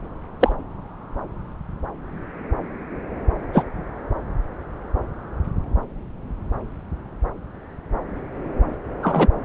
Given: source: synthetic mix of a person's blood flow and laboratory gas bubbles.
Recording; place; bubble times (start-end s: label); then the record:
Doppler ultrasound of blood flow; subclavian vein
0.39-0.52 s: bubbles
3.53-3.64 s: bubbles
9.03-9.28 s: bubbles
From the record:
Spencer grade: 2 (many but less than half of the cardiac periods contain bubble signals, singularly or in groups); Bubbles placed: anywhere in the cardiac cycle